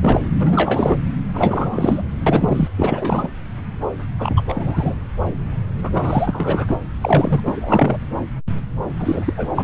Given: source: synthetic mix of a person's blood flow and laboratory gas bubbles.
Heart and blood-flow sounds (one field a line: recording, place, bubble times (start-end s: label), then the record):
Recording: Doppler ultrasound of blood flow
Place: subclavian vein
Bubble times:
0.00-0.20 s: bubbles
0.39-0.98 s: bubbles
1.33-2.02 s: bubbles
2.26-2.68 s: bubbles
2.77-3.29 s: bubbles
4.18-4.43 s: bubbles
4.48-4.95 s: bubbles
5.83-5.89 s: bubbles
5.92-6.76 s: bubbles
7.01-7.40 s: bubbles
7.46-8.02 s: bubbles
8.99-9.33 s: bubbles
9.37-9.49 s: bubbles
9.55-9.64 s: bubbles
From the record:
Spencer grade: 3 (all of the cardiac periods contain showers or single bubble signals, but not dominating or overriding the cardiac motion signals)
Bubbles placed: anywhere in the cardiac cycle